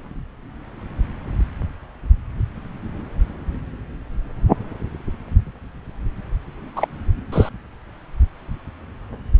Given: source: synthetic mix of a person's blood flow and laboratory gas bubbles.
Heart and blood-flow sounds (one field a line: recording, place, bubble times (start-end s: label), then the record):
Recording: Doppler ultrasound of blood flow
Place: subclavian vein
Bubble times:
6.76-6.88 s: bubbles
7.32-7.49 s: bubbles
From the record:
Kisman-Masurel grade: 213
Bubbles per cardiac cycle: several, 3 to 8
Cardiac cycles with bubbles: 1 to 10%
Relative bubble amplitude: loud (0.450 to 0.775)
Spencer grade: 1 (occasional bubble signal discernible with the cardiac motion signal, with majority of cardiac periods free of bubbles)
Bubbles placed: anywhere in the cardiac cycle